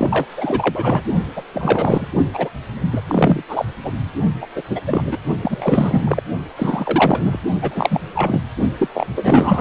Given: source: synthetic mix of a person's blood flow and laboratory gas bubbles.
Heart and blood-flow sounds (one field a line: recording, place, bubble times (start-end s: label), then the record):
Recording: Doppler ultrasound of blood flow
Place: precordium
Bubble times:
0.00-0.26 s: bubbles
0.36-1.02 s: bubbles
1.36-1.43 s: bubbles
1.53-2.08 s: bubbles
2.33-2.49 s: bubbles
2.67-2.88 s: bubbles
2.92-3.01 s: bubbles
3.08-3.43 s: bubbles
3.48-3.65 s: bubbles
3.83-3.92 s: bubbles
4.39-4.47 s: bubbles
4.55-4.62 s: bubbles
4.69-4.81 s: bubbles
4.87-5.18 s: bubbles
5.42-6.21 s: bubbles
6.56-7.40 s: bubbles
7.61-8.01 s: bubbles
8.15-8.42 s: bubbles
8.79-8.88 s: bubbles
8.94-9.07 s: bubbles
9.16-9.61 s: bubbles
From the record:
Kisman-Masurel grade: 333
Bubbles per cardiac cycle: rolling drumbeat, 9 or more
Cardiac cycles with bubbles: 50 to 99%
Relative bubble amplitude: loud (0.450 to 0.775)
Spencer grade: 3 (all of the cardiac periods contain showers or single bubble signals, but not dominating or overriding the cardiac motion signals)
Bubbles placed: only in the low amplitude regions of the cardiac cycle